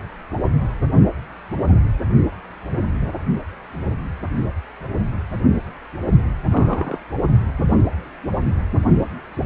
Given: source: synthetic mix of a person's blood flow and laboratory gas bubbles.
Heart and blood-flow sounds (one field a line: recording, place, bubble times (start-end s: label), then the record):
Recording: Doppler ultrasound of blood flow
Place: precordium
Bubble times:
6.50-6.98 s: bubbles
From the record:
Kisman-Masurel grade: 111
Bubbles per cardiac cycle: 1 to 2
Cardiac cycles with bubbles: 1 to 10%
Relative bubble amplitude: barely perceptible (0.100 to 0.250)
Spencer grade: 1 (occasional bubble signal discernible with the cardiac motion signal, with majority of cardiac periods free of bubbles)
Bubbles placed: only in the low amplitude regions of the cardiac cycle